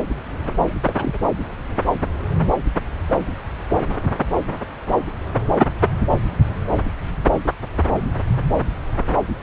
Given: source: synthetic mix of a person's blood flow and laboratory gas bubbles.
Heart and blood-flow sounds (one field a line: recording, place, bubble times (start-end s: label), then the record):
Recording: Doppler ultrasound of blood flow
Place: subclavian vein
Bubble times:
0.60-0.75 s: bubbles
0.85-0.93 s: bubbles
0.97-1.19 s: bubbles
From the record:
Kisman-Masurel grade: 221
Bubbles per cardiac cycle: several, 3 to 8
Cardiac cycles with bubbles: 10 to 50%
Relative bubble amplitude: barely perceptible (0.100 to 0.250)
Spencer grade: 2 (many but less than half of the cardiac periods contain bubble signals, singularly or in groups)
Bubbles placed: anywhere in the cardiac cycle